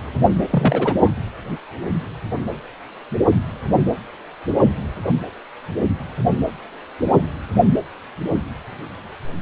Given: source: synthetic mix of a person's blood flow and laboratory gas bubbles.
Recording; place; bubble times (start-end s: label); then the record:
Doppler ultrasound of blood flow; precordium
0.50-0.94 s: bubbles
0.99-1.09 s: bubbles
From the record:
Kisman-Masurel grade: 212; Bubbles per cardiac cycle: several, 3 to 8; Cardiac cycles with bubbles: 1 to 10%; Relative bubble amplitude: moderate (0.250 to 0.450); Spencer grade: 1 (occasional bubble signal discernible with the cardiac motion signal, with majority of cardiac periods free of bubbles); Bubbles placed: anywhere in the cardiac cycle